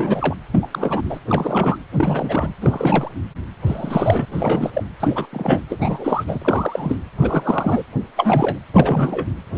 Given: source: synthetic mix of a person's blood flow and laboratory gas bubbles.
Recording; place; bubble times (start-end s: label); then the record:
Doppler ultrasound of blood flow; precordium
0.00-0.37 s: bubbles
0.52-0.68 s: bubbles
0.71-1.20 s: bubbles
1.28-1.78 s: bubbles
1.92-2.52 s: bubbles
2.60-3.11 s: bubbles
3.67-4.25 s: bubbles
4.32-4.70 s: bubbles
4.74-4.83 s: bubbles
5.00-5.26 s: bubbles
5.33-5.61 s: bubbles
5.69-6.24 s: bubbles
6.27-6.38 s: bubbles
6.42-6.96 s: bubbles
7.20-7.83 s: bubbles
8.16-8.60 s: bubbles
8.74-9.27 s: bubbles
9.55-9.58 s: bubbles
From the record:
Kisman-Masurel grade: 342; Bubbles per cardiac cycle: rolling drumbeat, 9 or more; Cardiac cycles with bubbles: 100%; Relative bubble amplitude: moderate (0.250 to 0.450); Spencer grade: 3 (all of the cardiac periods contain showers or single bubble signals, but not dominating or overriding the cardiac motion signals); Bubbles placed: anywhere in the cardiac cycle